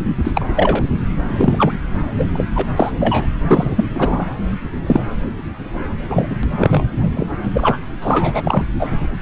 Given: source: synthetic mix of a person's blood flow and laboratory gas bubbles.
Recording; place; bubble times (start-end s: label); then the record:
Doppler ultrasound of blood flow; subclavian vein
0.24-0.46 s: bubbles
0.56-0.84 s: bubbles
1.28-1.72 s: bubbles
2.17-2.24 s: bubbles
2.33-2.45 s: bubbles
2.55-2.67 s: bubbles
2.76-2.92 s: bubbles
3.00-3.27 s: bubbles
3.47-3.85 s: bubbles
3.94-4.25 s: bubbles
4.87-5.00 s: bubbles
6.08-6.36 s: bubbles
6.43-6.83 s: bubbles
6.96-7.09 s: bubbles
7.16-7.27 s: bubbles
7.54-7.79 s: bubbles
8.02-8.65 s: bubbles
8.79-9.08 s: bubbles
From the record:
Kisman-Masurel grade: 243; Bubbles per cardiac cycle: several, 3 to 8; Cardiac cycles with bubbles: 100%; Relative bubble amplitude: loud (0.450 to 0.775); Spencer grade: 3 (all of the cardiac periods contain showers or single bubble signals, but not dominating or overriding the cardiac motion signals); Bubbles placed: anywhere in the cardiac cycle